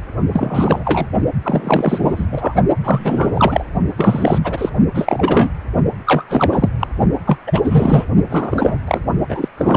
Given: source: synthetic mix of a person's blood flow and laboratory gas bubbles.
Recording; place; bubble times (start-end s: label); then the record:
Doppler ultrasound of blood flow; precordium
0.33-1.06 s: bubbles
1.43-2.25 s: bubbles
2.32-2.54 s: bubbles
2.83-3.64 s: bubbles
3.97-4.38 s: bubbles
4.43-4.69 s: bubbles
4.94-5.50 s: bubbles
6.06-6.24 s: bubbles
6.29-6.69 s: bubbles
6.79-6.87 s: bubbles
7.26-7.37 s: bubbles
7.46-8.05 s: bubbles
8.29-8.78 s: bubbles
8.87-9.00 s: bubbles
9.29-9.48 s: bubbles
9.57-9.77 s: bubbles
From the record:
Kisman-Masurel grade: 343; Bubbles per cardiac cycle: rolling drumbeat, 9 or more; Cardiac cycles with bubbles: 100%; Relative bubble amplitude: loud (0.450 to 0.775); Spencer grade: 3 (all of the cardiac periods contain showers or single bubble signals, but not dominating or overriding the cardiac motion signals); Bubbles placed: only in the low amplitude regions of the cardiac cycle